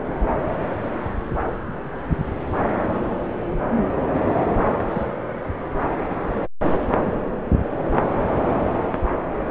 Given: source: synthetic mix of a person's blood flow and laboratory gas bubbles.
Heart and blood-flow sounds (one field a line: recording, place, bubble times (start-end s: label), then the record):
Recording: Doppler ultrasound of blood flow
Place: subclavian vein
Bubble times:
4.35-4.44 s: bubbles
4.91-5.04 s: bubbles
From the record:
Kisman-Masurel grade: 112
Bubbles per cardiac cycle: 1 to 2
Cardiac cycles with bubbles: 1 to 10%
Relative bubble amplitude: moderate (0.250 to 0.450)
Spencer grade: 1 (occasional bubble signal discernible with the cardiac motion signal, with majority of cardiac periods free of bubbles)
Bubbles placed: anywhere in the cardiac cycle